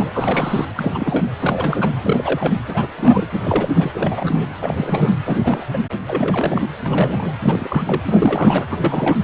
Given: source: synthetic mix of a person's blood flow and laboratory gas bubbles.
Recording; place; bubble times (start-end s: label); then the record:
Doppler ultrasound of blood flow; precordium
0.00-0.11 s: bubbles
0.13-0.66 s: bubbles
0.76-1.26 s: bubbles
1.39-1.93 s: bubbles
2.02-2.59 s: bubbles
2.67-2.88 s: bubbles
2.97-3.26 s: bubbles
3.33-3.69 s: bubbles
3.75-4.46 s: bubbles
4.61-5.15 s: bubbles
5.25-5.64 s: bubbles
5.72-5.79 s: bubbles
6.06-6.67 s: bubbles
6.85-7.34 s: bubbles
7.42-8.03 s: bubbles
8.06-8.68 s: bubbles
8.70-8.78 s: bubbles
8.81-9.18 s: bubbles
From the record:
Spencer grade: 3 (all of the cardiac periods contain showers or single bubble signals, but not dominating or overriding the cardiac motion signals); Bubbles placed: anywhere in the cardiac cycle